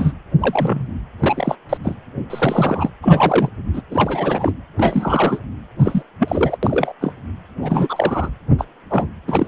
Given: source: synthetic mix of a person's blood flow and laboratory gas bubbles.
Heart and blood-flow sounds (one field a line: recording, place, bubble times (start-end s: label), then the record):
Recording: Doppler ultrasound of blood flow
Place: precordium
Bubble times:
0.00-0.12 s: bubbles
0.40-0.88 s: bubbles
1.20-1.55 s: bubbles
1.69-1.77 s: bubbles
1.83-1.94 s: bubbles
2.29-2.90 s: bubbles
3.02-3.50 s: bubbles
3.74-3.82 s: bubbles
3.90-4.53 s: bubbles
4.77-5.39 s: bubbles
5.79-6.03 s: bubbles
6.20-6.57 s: bubbles
6.62-6.93 s: bubbles
7.00-7.13 s: bubbles
7.62-8.30 s: bubbles
8.58-8.65 s: bubbles
8.90-9.09 s: bubbles
9.28-9.47 s: bubbles
From the record:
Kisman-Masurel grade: 243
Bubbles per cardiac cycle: several, 3 to 8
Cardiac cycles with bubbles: 100%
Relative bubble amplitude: loud (0.450 to 0.775)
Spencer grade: 3 (all of the cardiac periods contain showers or single bubble signals, but not dominating or overriding the cardiac motion signals)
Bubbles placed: anywhere in the cardiac cycle